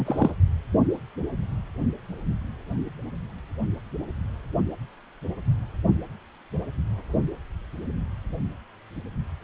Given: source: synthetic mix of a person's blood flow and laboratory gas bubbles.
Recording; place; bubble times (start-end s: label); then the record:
Doppler ultrasound of blood flow; precordium
0.00-0.32 s: bubbles
From the record:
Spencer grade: 1 (occasional bubble signal discernible with the cardiac motion signal, with majority of cardiac periods free of bubbles); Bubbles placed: only in the low amplitude regions of the cardiac cycle